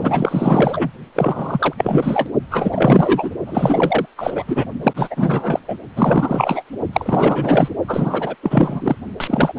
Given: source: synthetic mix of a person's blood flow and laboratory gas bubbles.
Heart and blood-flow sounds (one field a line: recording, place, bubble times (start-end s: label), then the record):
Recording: Doppler ultrasound of blood flow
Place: precordium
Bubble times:
0.01-0.91 s: bubbles
1.15-1.73 s: bubbles
1.77-2.29 s: bubbles
2.50-3.30 s: bubbles
3.46-4.05 s: bubbles
4.17-4.66 s: bubbles
4.83-5.59 s: bubbles
5.67-5.77 s: bubbles
5.96-6.63 s: bubbles
6.92-7.68 s: bubbles
7.87-8.35 s: bubbles
8.43-8.96 s: bubbles
9.20-9.53 s: bubbles
9.56-9.59 s: bubbles
From the record:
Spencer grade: 4 (maximum detectable bubble signal sounding continuously throughout systole and diastole of every cardiac period, and overriding the amplitude of the normal cardiac signals)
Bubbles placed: only in the low amplitude regions of the cardiac cycle